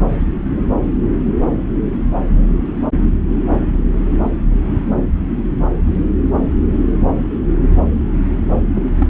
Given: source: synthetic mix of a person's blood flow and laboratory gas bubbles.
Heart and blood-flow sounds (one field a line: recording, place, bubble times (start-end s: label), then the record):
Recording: Doppler ultrasound of blood flow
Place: subclavian vein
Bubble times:
8.75-8.82 s: bubbles
8.99-9.08 s: bubbles
From the record:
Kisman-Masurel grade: 211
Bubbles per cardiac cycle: several, 3 to 8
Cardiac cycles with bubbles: 1 to 10%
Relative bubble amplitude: barely perceptible (0.100 to 0.250)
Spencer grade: 1 (occasional bubble signal discernible with the cardiac motion signal, with majority of cardiac periods free of bubbles)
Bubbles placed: anywhere in the cardiac cycle